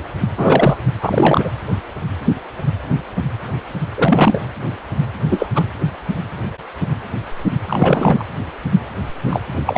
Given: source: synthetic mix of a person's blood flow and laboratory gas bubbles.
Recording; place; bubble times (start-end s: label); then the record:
Doppler ultrasound of blood flow; precordium
0.37-0.78 s: bubbles
1.01-1.50 s: bubbles
3.97-4.40 s: bubbles
5.29-5.47 s: bubbles
5.54-5.63 s: bubbles
7.68-8.27 s: bubbles
9.24-9.41 s: bubbles
9.66-9.78 s: bubbles
From the record:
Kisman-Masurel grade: 223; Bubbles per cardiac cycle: several, 3 to 8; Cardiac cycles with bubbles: 10 to 50%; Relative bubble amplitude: loud (0.450 to 0.775); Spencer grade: 2 (many but less than half of the cardiac periods contain bubble signals, singularly or in groups); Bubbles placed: anywhere in the cardiac cycle